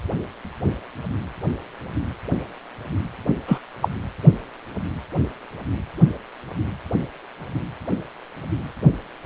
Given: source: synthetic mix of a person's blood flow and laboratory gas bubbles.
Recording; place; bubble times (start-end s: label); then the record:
Doppler ultrasound of blood flow; precordium
3.47-3.58 s: bubbles
3.82-3.88 s: bubbles
From the record:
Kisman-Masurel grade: 113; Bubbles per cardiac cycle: 1 to 2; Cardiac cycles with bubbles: 1 to 10%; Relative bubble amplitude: loud (0.450 to 0.775); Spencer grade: 1 (occasional bubble signal discernible with the cardiac motion signal, with majority of cardiac periods free of bubbles); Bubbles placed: anywhere in the cardiac cycle